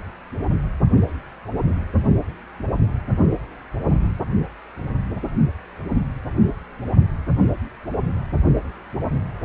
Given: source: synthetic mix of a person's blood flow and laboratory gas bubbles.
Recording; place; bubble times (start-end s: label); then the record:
Doppler ultrasound of blood flow; precordium
no bubbles
From the record:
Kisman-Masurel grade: 000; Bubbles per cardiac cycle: 0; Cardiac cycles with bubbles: 0%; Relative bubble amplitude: no bubbles discernible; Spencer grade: 0 (complete lack of bubble signals)